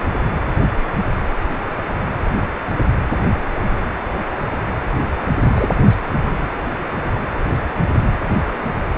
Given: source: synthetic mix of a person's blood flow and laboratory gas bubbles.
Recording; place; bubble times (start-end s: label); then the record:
Doppler ultrasound of blood flow; precordium
5.46-5.67 s: bubbles
5.85-5.96 s: bubbles
6.24-6.32 s: bubbles
From the record:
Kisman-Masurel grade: 212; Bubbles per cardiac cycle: several, 3 to 8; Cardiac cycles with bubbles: 1 to 10%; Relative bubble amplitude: moderate (0.250 to 0.450); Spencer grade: 1 (occasional bubble signal discernible with the cardiac motion signal, with majority of cardiac periods free of bubbles); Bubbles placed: anywhere in the cardiac cycle